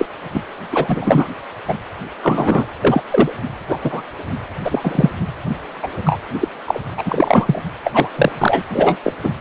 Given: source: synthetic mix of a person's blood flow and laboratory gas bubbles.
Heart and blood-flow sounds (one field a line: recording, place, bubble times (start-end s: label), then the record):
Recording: Doppler ultrasound of blood flow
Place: precordium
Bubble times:
0.00-0.06 s: bubbles
0.34-0.42 s: bubbles
0.72-1.28 s: bubbles
1.68-1.75 s: bubbles
2.22-2.67 s: bubbles
2.83-3.03 s: bubbles
3.10-3.31 s: bubbles
3.68-3.80 s: bubbles
3.83-4.02 s: bubbles
4.65-5.10 s: bubbles
5.83-5.88 s: bubbles
6.04-6.19 s: bubbles
6.41-6.49 s: bubbles
6.67-6.80 s: bubbles
6.86-6.88 s: bubbles
6.97-7.62 s: bubbles
7.85-8.09 s: bubbles
8.16-8.32 s: bubbles
8.38-8.62 s: bubbles
8.70-8.96 s: bubbles
9.04-9.13 s: bubbles
9.23-9.31 s: bubbles
From the record:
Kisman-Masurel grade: 243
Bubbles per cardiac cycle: several, 3 to 8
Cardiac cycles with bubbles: 100%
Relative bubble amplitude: loud (0.450 to 0.775)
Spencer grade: 3 (all of the cardiac periods contain showers or single bubble signals, but not dominating or overriding the cardiac motion signals)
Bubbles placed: anywhere in the cardiac cycle